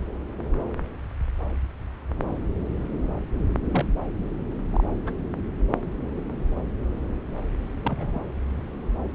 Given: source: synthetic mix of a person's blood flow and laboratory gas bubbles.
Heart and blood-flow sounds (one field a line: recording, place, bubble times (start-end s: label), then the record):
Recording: Doppler ultrasound of blood flow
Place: subclavian vein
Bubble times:
3.71-3.85 s: bubbles
4.69-4.86 s: bubbles
5.05-5.17 s: bubbles
7.83-8.24 s: bubbles
From the record:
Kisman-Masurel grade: 122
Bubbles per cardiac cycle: 1 to 2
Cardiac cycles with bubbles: 10 to 50%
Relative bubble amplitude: moderate (0.250 to 0.450)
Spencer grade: 2 (many but less than half of the cardiac periods contain bubble signals, singularly or in groups)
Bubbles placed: anywhere in the cardiac cycle